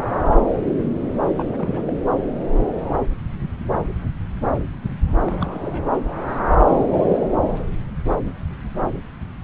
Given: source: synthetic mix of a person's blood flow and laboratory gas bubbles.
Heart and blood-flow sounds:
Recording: Doppler ultrasound of blood flow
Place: subclavian vein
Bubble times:
1.37-1.44 s: bubbles
1.52-1.83 s: bubbles
1.86-1.94 s: bubbles
5.22-5.89 s: bubbles
6.66-7.18 s: bubbles
From the record:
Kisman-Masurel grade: 221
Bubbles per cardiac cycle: several, 3 to 8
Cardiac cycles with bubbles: 10 to 50%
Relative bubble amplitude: barely perceptible (0.100 to 0.250)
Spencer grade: 2 (many but less than half of the cardiac periods contain bubble signals, singularly or in groups)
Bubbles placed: anywhere in the cardiac cycle

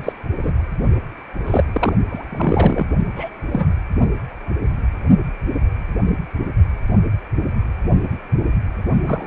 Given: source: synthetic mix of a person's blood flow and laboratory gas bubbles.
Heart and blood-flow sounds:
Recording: Doppler ultrasound of blood flow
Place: precordium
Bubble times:
0.00-0.13 s: bubbles
0.42-0.53 s: bubbles
1.47-1.64 s: bubbles
1.72-1.93 s: bubbles
2.09-2.86 s: bubbles
3.16-3.30 s: bubbles
3.51-3.67 s: bubbles
9.05-9.27 s: bubbles
From the record:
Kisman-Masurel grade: 232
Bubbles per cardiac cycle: several, 3 to 8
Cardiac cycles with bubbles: 50 to 99%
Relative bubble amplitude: moderate (0.250 to 0.450)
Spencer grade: 3 (all of the cardiac periods contain showers or single bubble signals, but not dominating or overriding the cardiac motion signals)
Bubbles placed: only in the low amplitude regions of the cardiac cycle

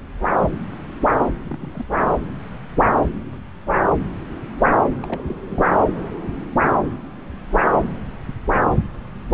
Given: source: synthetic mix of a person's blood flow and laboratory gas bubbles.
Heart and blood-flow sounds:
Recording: Doppler ultrasound of blood flow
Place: subclavian vein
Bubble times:
1.51-1.86 s: bubbles
2.02-2.19 s: bubbles
5.03-5.22 s: bubbles
5.28-5.39 s: bubbles
5.45-5.62 s: bubbles
5.71-5.79 s: bubbles
From the record:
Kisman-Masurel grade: 221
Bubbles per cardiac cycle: several, 3 to 8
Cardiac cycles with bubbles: 10 to 50%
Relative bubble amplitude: barely perceptible (0.100 to 0.250)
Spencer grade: 2 (many but less than half of the cardiac periods contain bubble signals, singularly or in groups)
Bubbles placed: anywhere in the cardiac cycle

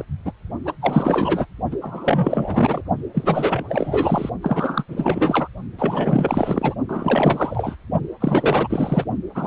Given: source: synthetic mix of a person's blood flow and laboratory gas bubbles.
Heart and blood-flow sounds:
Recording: Doppler ultrasound of blood flow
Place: precordium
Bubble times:
0.00-0.05 s: bubbles
0.25-0.32 s: bubbles
0.65-0.73 s: bubbles
0.81-1.46 s: bubbles
1.71-1.77 s: bubbles
1.81-2.81 s: bubbles
3.14-3.65 s: bubbles
3.69-4.29 s: bubbles
4.42-4.84 s: bubbles
4.88-5.48 s: bubbles
5.79-6.75 s: bubbles
6.88-7.76 s: bubbles
8.21-9.04 s: bubbles
9.35-9.47 s: bubbles
From the record:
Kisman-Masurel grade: 444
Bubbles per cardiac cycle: continuous sound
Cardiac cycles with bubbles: 100%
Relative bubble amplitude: maximal (0.775 to 0.999)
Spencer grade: 4 (maximum detectable bubble signal sounding continuously throughout systole and diastole of every cardiac period, and overriding the amplitude of the normal cardiac signals)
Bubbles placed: only in the low amplitude regions of the cardiac cycle

